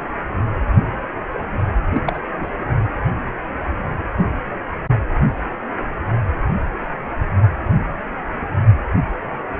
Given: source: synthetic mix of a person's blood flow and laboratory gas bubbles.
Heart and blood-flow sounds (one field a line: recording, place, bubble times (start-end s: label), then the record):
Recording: Doppler ultrasound of blood flow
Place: precordium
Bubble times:
1.94-2.00 s: bubbles
2.06-2.19 s: bubbles
2.40-2.47 s: bubbles
From the record:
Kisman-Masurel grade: 212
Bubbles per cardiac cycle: several, 3 to 8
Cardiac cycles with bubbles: 1 to 10%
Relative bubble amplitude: moderate (0.250 to 0.450)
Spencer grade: 1 (occasional bubble signal discernible with the cardiac motion signal, with majority of cardiac periods free of bubbles)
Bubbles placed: anywhere in the cardiac cycle